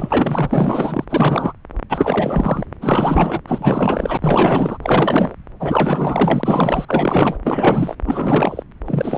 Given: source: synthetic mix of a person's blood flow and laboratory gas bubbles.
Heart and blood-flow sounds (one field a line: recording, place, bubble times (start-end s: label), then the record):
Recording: Doppler ultrasound of blood flow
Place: subclavian vein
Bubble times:
0.00-1.05 s: bubbles
1.09-1.53 s: bubbles
1.89-2.65 s: bubbles
2.81-3.41 s: bubbles
3.48-4.17 s: bubbles
4.20-4.77 s: bubbles
4.82-5.35 s: bubbles
5.59-6.85 s: bubbles
6.88-7.38 s: bubbles
7.44-7.95 s: bubbles
8.05-8.63 s: bubbles
8.86-9.18 s: bubbles
From the record:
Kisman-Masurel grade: 444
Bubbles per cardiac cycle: continuous sound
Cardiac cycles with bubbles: 100%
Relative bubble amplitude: maximal (0.775 to 0.999)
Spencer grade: 4 (maximum detectable bubble signal sounding continuously throughout systole and diastole of every cardiac period, and overriding the amplitude of the normal cardiac signals)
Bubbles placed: anywhere in the cardiac cycle